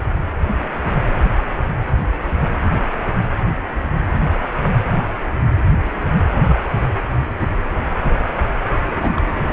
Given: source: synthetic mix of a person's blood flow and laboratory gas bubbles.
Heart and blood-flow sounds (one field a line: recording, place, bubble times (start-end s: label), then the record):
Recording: Doppler ultrasound of blood flow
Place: precordium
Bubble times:
8.88-9.22 s: bubbles
From the record:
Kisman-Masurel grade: 211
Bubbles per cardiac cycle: several, 3 to 8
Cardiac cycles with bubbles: 1 to 10%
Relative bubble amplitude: barely perceptible (0.100 to 0.250)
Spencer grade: 1 (occasional bubble signal discernible with the cardiac motion signal, with majority of cardiac periods free of bubbles)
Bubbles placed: anywhere in the cardiac cycle